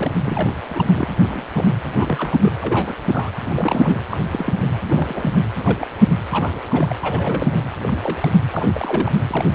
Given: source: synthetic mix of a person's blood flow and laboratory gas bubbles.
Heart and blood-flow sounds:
Doppler ultrasound of blood flow; precordium
0.00-0.11 s: bubbles
0.16-0.55 s: bubbles
0.65-1.08 s: bubbles
1.21-1.46 s: bubbles
1.54-1.64 s: bubbles
1.94-2.38 s: bubbles
2.41-2.52 s: bubbles
2.62-2.95 s: bubbles
3.12-3.31 s: bubbles
3.44-4.02 s: bubbles
4.09-4.17 s: bubbles
4.31-4.72 s: bubbles
4.86-5.39 s: bubbles
5.59-5.87 s: bubbles
6.31-6.51 s: bubbles
6.54-6.62 s: bubbles
6.68-6.96 s: bubbles
7.00-7.63 s: bubbles
7.82-8.30 s: bubbles
8.51-9.12 s: bubbles
9.29-9.47 s: bubbles
From the record:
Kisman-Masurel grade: 242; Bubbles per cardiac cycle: several, 3 to 8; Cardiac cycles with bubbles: 100%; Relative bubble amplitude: moderate (0.250 to 0.450); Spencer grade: 3 (all of the cardiac periods contain showers or single bubble signals, but not dominating or overriding the cardiac motion signals); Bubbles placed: anywhere in the cardiac cycle

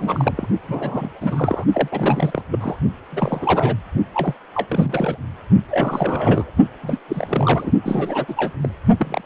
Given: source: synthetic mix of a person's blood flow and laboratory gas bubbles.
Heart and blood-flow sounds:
Doppler ultrasound of blood flow; precordium
0.00-0.47 s: bubbles
0.67-1.10 s: bubbles
1.21-1.65 s: bubbles
1.74-1.89 s: bubbles
1.92-2.43 s: bubbles
2.50-2.77 s: bubbles
3.12-3.75 s: bubbles
4.14-4.34 s: bubbles
4.54-5.17 s: bubbles
5.71-6.50 s: bubbles
6.83-6.98 s: bubbles
7.08-7.71 s: bubbles
7.83-8.53 s: bubbles
8.62-8.68 s: bubbles
8.97-9.21 s: bubbles
From the record:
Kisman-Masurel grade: 332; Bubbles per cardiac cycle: rolling drumbeat, 9 or more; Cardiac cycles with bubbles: 50 to 99%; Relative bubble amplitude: moderate (0.250 to 0.450); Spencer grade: 3 (all of the cardiac periods contain showers or single bubble signals, but not dominating or overriding the cardiac motion signals); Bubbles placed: only in the low amplitude regions of the cardiac cycle

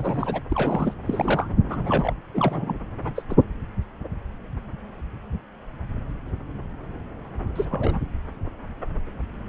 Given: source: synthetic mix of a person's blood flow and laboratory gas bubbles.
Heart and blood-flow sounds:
Doppler ultrasound of blood flow; subclavian vein
0.00-0.42 s: bubbles
0.49-0.94 s: bubbles
1.05-1.49 s: bubbles
1.71-2.13 s: bubbles
2.34-2.78 s: bubbles
3.04-3.12 s: bubbles
3.16-3.24 s: bubbles
3.29-3.36 s: bubbles
7.55-7.65 s: bubbles
7.68-7.99 s: bubbles
From the record:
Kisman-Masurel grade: 222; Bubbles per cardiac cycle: several, 3 to 8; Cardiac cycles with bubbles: 10 to 50%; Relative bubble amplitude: moderate (0.250 to 0.450); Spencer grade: 2 (many but less than half of the cardiac periods contain bubble signals, singularly or in groups); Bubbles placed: anywhere in the cardiac cycle

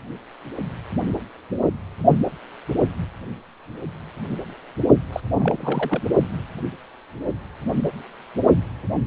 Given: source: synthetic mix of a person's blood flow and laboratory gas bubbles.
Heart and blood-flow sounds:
Doppler ultrasound of blood flow; precordium
5.12-5.20 s: bubbles
5.35-6.02 s: bubbles
From the record:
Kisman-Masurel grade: 211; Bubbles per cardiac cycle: several, 3 to 8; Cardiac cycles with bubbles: 1 to 10%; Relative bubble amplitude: barely perceptible (0.100 to 0.250); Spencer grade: 1 (occasional bubble signal discernible with the cardiac motion signal, with majority of cardiac periods free of bubbles); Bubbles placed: only in the low amplitude regions of the cardiac cycle

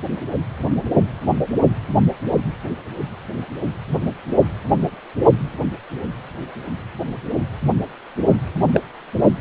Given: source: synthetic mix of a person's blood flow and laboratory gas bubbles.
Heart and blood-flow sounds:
Doppler ultrasound of blood flow; precordium
8.73-8.81 s: bubbles
From the record:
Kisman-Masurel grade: 113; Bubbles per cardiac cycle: 1 to 2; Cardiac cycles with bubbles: 1 to 10%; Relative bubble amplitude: loud (0.450 to 0.775); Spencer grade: 1 (occasional bubble signal discernible with the cardiac motion signal, with majority of cardiac periods free of bubbles); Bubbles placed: only in the low amplitude regions of the cardiac cycle

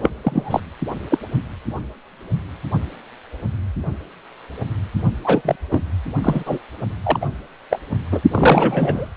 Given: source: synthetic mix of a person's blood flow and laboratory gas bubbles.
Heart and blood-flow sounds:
Doppler ultrasound of blood flow; precordium
0.02-0.10 s: bubbles
0.23-0.60 s: bubbles
1.10-1.18 s: bubbles
5.24-5.42 s: bubbles
5.45-5.55 s: bubbles
5.70-5.83 s: bubbles
6.23-6.58 s: bubbles
7.04-7.26 s: bubbles
7.71-7.79 s: bubbles
8.12-8.21 s: bubbles
8.31-9.08 s: bubbles
From the record:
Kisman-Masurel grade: 223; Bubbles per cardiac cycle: several, 3 to 8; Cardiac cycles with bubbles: 10 to 50%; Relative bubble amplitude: loud (0.450 to 0.775); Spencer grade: 2 (many but less than half of the cardiac periods contain bubble signals, singularly or in groups); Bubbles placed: only in the low amplitude regions of the cardiac cycle

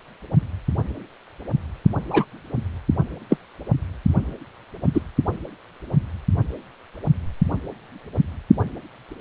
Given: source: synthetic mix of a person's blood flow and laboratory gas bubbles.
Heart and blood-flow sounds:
Doppler ultrasound of blood flow; precordium
2.10-2.25 s: bubbles
3.29-3.37 s: bubbles
4.94-5.02 s: bubbles
From the record:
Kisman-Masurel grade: 123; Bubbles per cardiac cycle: 1 to 2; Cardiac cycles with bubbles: 10 to 50%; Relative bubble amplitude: loud (0.450 to 0.775); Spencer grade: 2 (many but less than half of the cardiac periods contain bubble signals, singularly or in groups); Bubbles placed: only in the low amplitude regions of the cardiac cycle

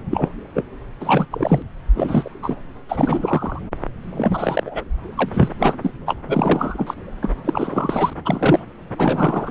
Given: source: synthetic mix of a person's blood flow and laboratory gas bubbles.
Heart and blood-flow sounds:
Doppler ultrasound of blood flow; subclavian vein
0.11-0.30 s: bubbles
0.54-0.64 s: bubbles
0.99-1.25 s: bubbles
1.31-1.62 s: bubbles
1.95-2.32 s: bubbles
2.42-2.57 s: bubbles
2.89-3.62 s: bubbles
4.16-4.83 s: bubbles
5.15-5.29 s: bubbles
5.33-5.49 s: bubbles
5.60-5.73 s: bubbles
5.82-5.91 s: bubbles
6.06-6.17 s: bubbles
6.27-6.94 s: bubbles
7.22-7.30 s: bubbles
7.44-8.13 s: bubbles
8.25-8.65 s: bubbles
8.98-9.51 s: bubbles
From the record:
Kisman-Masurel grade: 343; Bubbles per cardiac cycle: rolling drumbeat, 9 or more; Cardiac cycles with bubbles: 100%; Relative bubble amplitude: loud (0.450 to 0.775); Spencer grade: 3 (all of the cardiac periods contain showers or single bubble signals, but not dominating or overriding the cardiac motion signals); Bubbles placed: anywhere in the cardiac cycle

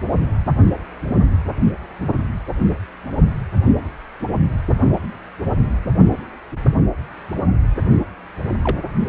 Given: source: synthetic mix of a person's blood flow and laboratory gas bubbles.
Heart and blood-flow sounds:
Doppler ultrasound of blood flow; precordium
8.62-8.77 s: bubbles
From the record:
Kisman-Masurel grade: 122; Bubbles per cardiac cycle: 1 to 2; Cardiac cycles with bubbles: 10 to 50%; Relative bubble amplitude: moderate (0.250 to 0.450); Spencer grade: 2 (many but less than half of the cardiac periods contain bubble signals, singularly or in groups); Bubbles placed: only in the low amplitude regions of the cardiac cycle

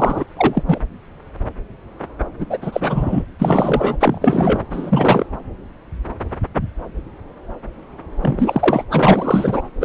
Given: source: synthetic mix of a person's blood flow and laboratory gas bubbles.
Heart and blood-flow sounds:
Doppler ultrasound of blood flow; subclavian vein
0.00-0.24 s: bubbles
0.36-0.63 s: bubbles
0.66-0.80 s: bubbles
2.39-2.47 s: bubbles
2.50-2.58 s: bubbles
2.62-3.26 s: bubbles
3.39-3.97 s: bubbles
4.00-4.64 s: bubbles
4.71-5.26 s: bubbles
8.21-8.84 s: bubbles
8.91-9.62 s: bubbles
9.80-9.85 s: bubbles
From the record:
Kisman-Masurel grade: 333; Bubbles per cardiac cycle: rolling drumbeat, 9 or more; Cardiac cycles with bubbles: 50 to 99%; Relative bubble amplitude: loud (0.450 to 0.775); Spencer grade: 3 (all of the cardiac periods contain showers or single bubble signals, but not dominating or overriding the cardiac motion signals); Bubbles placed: anywhere in the cardiac cycle

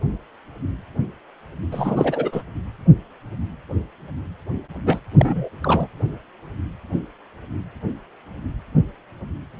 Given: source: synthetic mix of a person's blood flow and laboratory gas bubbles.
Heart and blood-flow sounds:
Doppler ultrasound of blood flow; precordium
1.72-2.42 s: bubbles
4.86-5.00 s: bubbles
5.16-5.50 s: bubbles
5.64-5.87 s: bubbles
From the record:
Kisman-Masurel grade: 222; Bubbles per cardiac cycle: several, 3 to 8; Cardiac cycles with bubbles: 10 to 50%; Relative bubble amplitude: moderate (0.250 to 0.450); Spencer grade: 2 (many but less than half of the cardiac periods contain bubble signals, singularly or in groups); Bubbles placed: anywhere in the cardiac cycle

